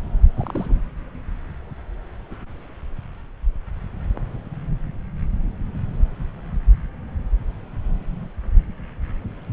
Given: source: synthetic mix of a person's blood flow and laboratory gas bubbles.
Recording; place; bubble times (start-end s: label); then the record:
Doppler ultrasound of blood flow; subclavian vein
0.34-0.78 s: bubbles
From the record:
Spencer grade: 1 (occasional bubble signal discernible with the cardiac motion signal, with majority of cardiac periods free of bubbles); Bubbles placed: anywhere in the cardiac cycle